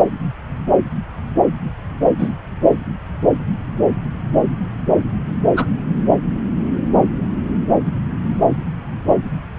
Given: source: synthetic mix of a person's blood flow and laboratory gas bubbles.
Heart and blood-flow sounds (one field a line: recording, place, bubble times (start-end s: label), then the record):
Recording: Doppler ultrasound of blood flow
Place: subclavian vein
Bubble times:
2.18-2.32 s: bubbles
5.56-5.66 s: bubbles
From the record:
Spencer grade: 1 (occasional bubble signal discernible with the cardiac motion signal, with majority of cardiac periods free of bubbles)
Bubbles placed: anywhere in the cardiac cycle